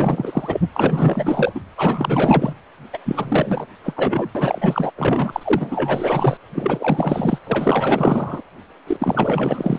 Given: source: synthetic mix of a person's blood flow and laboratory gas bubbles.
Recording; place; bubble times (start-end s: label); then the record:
Doppler ultrasound of blood flow; precordium
0.00-0.60 s: bubbles
0.73-1.60 s: bubbles
1.76-2.54 s: bubbles
2.93-2.98 s: bubbles
3.05-3.66 s: bubbles
3.84-3.94 s: bubbles
3.96-4.29 s: bubbles
4.34-4.58 s: bubbles
4.61-4.92 s: bubbles
4.96-6.37 s: bubbles
6.54-7.38 s: bubbles
7.46-8.42 s: bubbles
8.87-9.79 s: bubbles
From the record:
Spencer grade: 4 (maximum detectable bubble signal sounding continuously throughout systole and diastole of every cardiac period, and overriding the amplitude of the normal cardiac signals); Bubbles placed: anywhere in the cardiac cycle